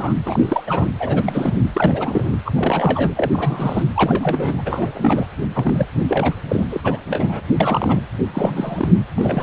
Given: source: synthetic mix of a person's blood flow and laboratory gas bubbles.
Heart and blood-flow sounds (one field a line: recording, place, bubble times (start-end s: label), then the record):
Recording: Doppler ultrasound of blood flow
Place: precordium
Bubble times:
0.00-0.14 s: bubbles
0.25-0.62 s: bubbles
0.66-0.88 s: bubbles
0.99-1.55 s: bubbles
1.61-1.70 s: bubbles
1.74-2.36 s: bubbles
2.45-3.14 s: bubbles
3.17-3.84 s: bubbles
3.96-5.27 s: bubbles
5.54-5.87 s: bubbles
6.08-6.36 s: bubbles
6.48-6.67 s: bubbles
6.70-6.81 s: bubbles
6.84-6.99 s: bubbles
7.08-7.41 s: bubbles
7.60-8.01 s: bubbles
8.32-8.97 s: bubbles
9.18-9.43 s: bubbles
From the record:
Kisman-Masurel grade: 342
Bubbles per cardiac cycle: rolling drumbeat, 9 or more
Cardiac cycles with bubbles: 100%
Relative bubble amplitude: moderate (0.250 to 0.450)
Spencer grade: 3 (all of the cardiac periods contain showers or single bubble signals, but not dominating or overriding the cardiac motion signals)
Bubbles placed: anywhere in the cardiac cycle